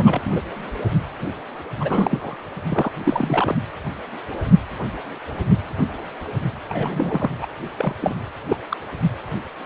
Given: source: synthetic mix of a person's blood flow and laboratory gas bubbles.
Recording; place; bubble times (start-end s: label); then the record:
Doppler ultrasound of blood flow; precordium
0.00-0.41 s: bubbles
1.80-2.37 s: bubbles
2.70-2.92 s: bubbles
3.04-3.56 s: bubbles
6.69-7.30 s: bubbles
7.41-7.47 s: bubbles
7.78-7.94 s: bubbles
8.02-8.15 s: bubbles
8.49-8.57 s: bubbles
8.71-8.77 s: bubbles
From the record:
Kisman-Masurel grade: 232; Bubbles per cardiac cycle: several, 3 to 8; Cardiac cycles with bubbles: 50 to 99%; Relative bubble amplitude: moderate (0.250 to 0.450); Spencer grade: 3 (all of the cardiac periods contain showers or single bubble signals, but not dominating or overriding the cardiac motion signals); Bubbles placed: anywhere in the cardiac cycle